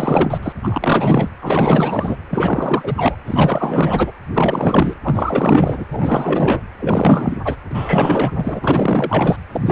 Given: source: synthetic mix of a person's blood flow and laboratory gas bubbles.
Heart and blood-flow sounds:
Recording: Doppler ultrasound of blood flow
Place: precordium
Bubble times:
0.00-0.38 s: bubbles
0.42-0.52 s: bubbles
0.63-1.29 s: bubbles
1.42-2.17 s: bubbles
2.30-2.95 s: bubbles
2.97-3.16 s: bubbles
3.27-4.12 s: bubbles
4.25-4.27 s: bubbles
4.33-4.94 s: bubbles
5.04-5.85 s: bubbles
5.92-6.62 s: bubbles
6.79-7.37 s: bubbles
7.45-7.56 s: bubbles
7.70-8.31 s: bubbles
8.36-9.36 s: bubbles
9.52-9.72 s: bubbles
From the record:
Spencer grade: 4 (maximum detectable bubble signal sounding continuously throughout systole and diastole of every cardiac period, and overriding the amplitude of the normal cardiac signals)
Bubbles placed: anywhere in the cardiac cycle

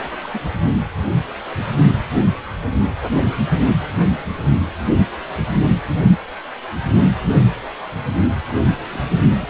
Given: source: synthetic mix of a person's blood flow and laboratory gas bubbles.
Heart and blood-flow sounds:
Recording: Doppler ultrasound of blood flow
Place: precordium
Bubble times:
0.02-0.30 s: bubbles
0.34-0.41 s: bubbles
8.53-8.65 s: bubbles
8.84-8.98 s: bubbles
9.26-9.49 s: bubbles
From the record:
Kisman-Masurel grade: 221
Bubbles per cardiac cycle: several, 3 to 8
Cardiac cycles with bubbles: 10 to 50%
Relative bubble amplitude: barely perceptible (0.100 to 0.250)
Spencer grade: 2 (many but less than half of the cardiac periods contain bubble signals, singularly or in groups)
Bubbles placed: anywhere in the cardiac cycle

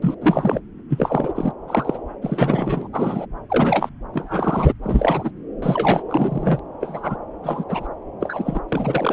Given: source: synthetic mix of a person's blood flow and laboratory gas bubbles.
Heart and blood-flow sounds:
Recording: Doppler ultrasound of blood flow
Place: subclavian vein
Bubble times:
0.02-0.15 s: bubbles
0.21-0.59 s: bubbles
0.90-1.32 s: bubbles
1.35-1.53 s: bubbles
1.68-1.98 s: bubbles
2.21-2.88 s: bubbles
2.92-3.26 s: bubbles
3.50-3.89 s: bubbles
4.13-4.73 s: bubbles
4.83-5.31 s: bubbles
5.62-6.02 s: bubbles
6.09-6.59 s: bubbles
6.80-7.17 s: bubbles
7.42-7.64 s: bubbles
7.69-7.88 s: bubbles
8.20-8.62 s: bubbles
8.69-9.13 s: bubbles
From the record:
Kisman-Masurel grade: 243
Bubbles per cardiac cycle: several, 3 to 8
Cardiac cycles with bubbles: 100%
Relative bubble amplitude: loud (0.450 to 0.775)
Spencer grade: 3 (all of the cardiac periods contain showers or single bubble signals, but not dominating or overriding the cardiac motion signals)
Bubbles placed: anywhere in the cardiac cycle

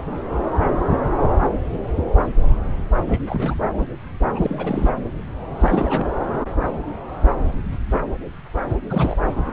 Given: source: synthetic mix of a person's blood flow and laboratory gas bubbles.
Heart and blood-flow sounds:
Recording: Doppler ultrasound of blood flow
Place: subclavian vein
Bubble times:
0.00-0.02 s: bubbles
3.08-3.21 s: bubbles
3.27-3.55 s: bubbles
4.34-4.89 s: bubbles
5.60-6.06 s: bubbles
8.69-8.76 s: bubbles
8.90-9.17 s: bubbles
From the record:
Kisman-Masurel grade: 221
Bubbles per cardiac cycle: several, 3 to 8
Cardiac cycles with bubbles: 10 to 50%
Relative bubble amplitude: barely perceptible (0.100 to 0.250)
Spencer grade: 2 (many but less than half of the cardiac periods contain bubble signals, singularly or in groups)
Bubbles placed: anywhere in the cardiac cycle

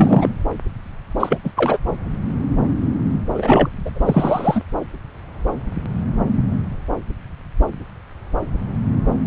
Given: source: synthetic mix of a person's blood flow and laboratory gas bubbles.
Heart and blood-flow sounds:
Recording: Doppler ultrasound of blood flow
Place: subclavian vein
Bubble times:
0.00-0.29 s: bubbles
1.19-1.39 s: bubbles
1.43-1.51 s: bubbles
1.56-1.78 s: bubbles
3.34-3.69 s: bubbles
3.85-3.91 s: bubbles
3.94-4.62 s: bubbles
From the record:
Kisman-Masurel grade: 223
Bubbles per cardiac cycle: several, 3 to 8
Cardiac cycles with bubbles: 10 to 50%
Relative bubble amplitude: loud (0.450 to 0.775)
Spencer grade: 2 (many but less than half of the cardiac periods contain bubble signals, singularly or in groups)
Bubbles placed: anywhere in the cardiac cycle

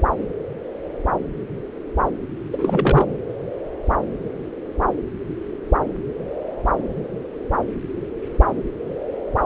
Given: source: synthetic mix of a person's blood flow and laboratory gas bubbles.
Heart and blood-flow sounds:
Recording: Doppler ultrasound of blood flow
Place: subclavian vein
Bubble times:
2.51-3.18 s: bubbles
From the record:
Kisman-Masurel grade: 212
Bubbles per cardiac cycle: several, 3 to 8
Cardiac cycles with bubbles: 1 to 10%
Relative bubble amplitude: moderate (0.250 to 0.450)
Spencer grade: 1 (occasional bubble signal discernible with the cardiac motion signal, with majority of cardiac periods free of bubbles)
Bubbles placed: anywhere in the cardiac cycle

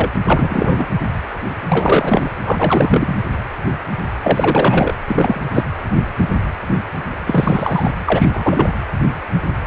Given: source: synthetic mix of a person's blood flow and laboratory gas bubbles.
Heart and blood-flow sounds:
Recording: Doppler ultrasound of blood flow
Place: precordium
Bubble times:
0.00-0.10 s: bubbles
0.27-0.87 s: bubbles
1.69-2.32 s: bubbles
2.43-3.17 s: bubbles
4.22-4.94 s: bubbles
5.06-5.41 s: bubbles
5.54-5.65 s: bubbles
7.27-7.90 s: bubbles
8.05-8.29 s: bubbles
8.33-8.83 s: bubbles
From the record:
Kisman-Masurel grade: 333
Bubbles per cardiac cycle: rolling drumbeat, 9 or more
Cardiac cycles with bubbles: 50 to 99%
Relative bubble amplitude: loud (0.450 to 0.775)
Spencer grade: 3 (all of the cardiac periods contain showers or single bubble signals, but not dominating or overriding the cardiac motion signals)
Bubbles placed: anywhere in the cardiac cycle

